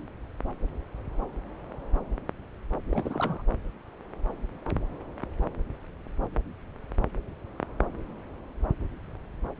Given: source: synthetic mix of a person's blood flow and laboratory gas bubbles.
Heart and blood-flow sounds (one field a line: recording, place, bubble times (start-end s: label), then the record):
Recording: Doppler ultrasound of blood flow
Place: subclavian vein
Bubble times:
2.91-3.42 s: bubbles
From the record:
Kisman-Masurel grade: 211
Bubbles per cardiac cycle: several, 3 to 8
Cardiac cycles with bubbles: 1 to 10%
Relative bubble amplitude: barely perceptible (0.100 to 0.250)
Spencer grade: 1 (occasional bubble signal discernible with the cardiac motion signal, with majority of cardiac periods free of bubbles)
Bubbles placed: anywhere in the cardiac cycle